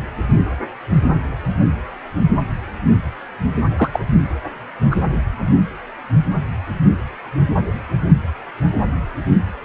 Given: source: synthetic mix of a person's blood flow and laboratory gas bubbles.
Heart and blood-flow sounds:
Doppler ultrasound of blood flow; precordium
3.76-3.90 s: bubbles
3.92-4.00 s: bubbles
4.91-4.96 s: bubbles
From the record:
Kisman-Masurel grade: 123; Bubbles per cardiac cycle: 1 to 2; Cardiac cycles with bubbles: 10 to 50%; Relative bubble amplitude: loud (0.450 to 0.775); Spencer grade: 2 (many but less than half of the cardiac periods contain bubble signals, singularly or in groups); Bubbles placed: anywhere in the cardiac cycle

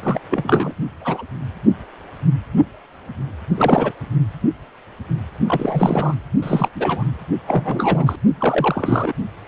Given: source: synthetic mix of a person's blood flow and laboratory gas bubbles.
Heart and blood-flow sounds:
Doppler ultrasound of blood flow; precordium
0.02-0.20 s: bubbles
0.30-0.73 s: bubbles
1.01-1.24 s: bubbles
3.55-3.92 s: bubbles
5.47-6.14 s: bubbles
6.42-6.69 s: bubbles
6.75-7.04 s: bubbles
7.47-8.16 s: bubbles
8.38-9.13 s: bubbles
From the record:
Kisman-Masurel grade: 332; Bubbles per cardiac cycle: rolling drumbeat, 9 or more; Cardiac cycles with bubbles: 50 to 99%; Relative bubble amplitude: moderate (0.250 to 0.450); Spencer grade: 3 (all of the cardiac periods contain showers or single bubble signals, but not dominating or overriding the cardiac motion signals); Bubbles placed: only in the low amplitude regions of the cardiac cycle

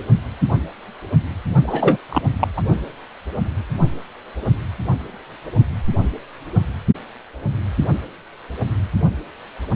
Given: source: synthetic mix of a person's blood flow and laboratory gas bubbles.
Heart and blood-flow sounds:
Doppler ultrasound of blood flow; precordium
1.64-1.97 s: bubbles
2.09-2.22 s: bubbles
2.40-2.48 s: bubbles
2.57-2.62 s: bubbles
From the record:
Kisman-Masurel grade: 223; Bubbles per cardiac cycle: several, 3 to 8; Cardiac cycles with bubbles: 10 to 50%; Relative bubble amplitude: loud (0.450 to 0.775); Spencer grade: 2 (many but less than half of the cardiac periods contain bubble signals, singularly or in groups); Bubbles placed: only in the low amplitude regions of the cardiac cycle

